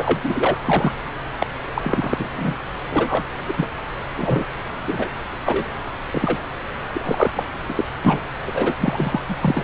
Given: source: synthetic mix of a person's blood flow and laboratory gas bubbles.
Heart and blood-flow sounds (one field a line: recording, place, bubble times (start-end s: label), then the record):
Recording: Doppler ultrasound of blood flow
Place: subclavian vein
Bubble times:
0.00-0.20 s: bubbles
0.23-0.58 s: bubbles
0.66-0.91 s: bubbles
1.39-1.47 s: bubbles
1.75-2.27 s: bubbles
2.36-2.56 s: bubbles
2.90-3.23 s: bubbles
3.48-3.54 s: bubbles
3.57-3.69 s: bubbles
4.17-4.46 s: bubbles
4.88-5.08 s: bubbles
5.45-5.78 s: bubbles
6.14-6.49 s: bubbles
6.92-7.32 s: bubbles
7.35-7.45 s: bubbles
7.69-7.85 s: bubbles
8.04-8.20 s: bubbles
8.45-8.75 s: bubbles
8.80-9.21 s: bubbles
9.29-9.37 s: bubbles
9.41-9.63 s: bubbles
From the record:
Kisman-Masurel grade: 243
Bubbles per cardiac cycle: several, 3 to 8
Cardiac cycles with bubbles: 100%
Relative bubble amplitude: loud (0.450 to 0.775)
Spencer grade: 3 (all of the cardiac periods contain showers or single bubble signals, but not dominating or overriding the cardiac motion signals)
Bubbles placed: anywhere in the cardiac cycle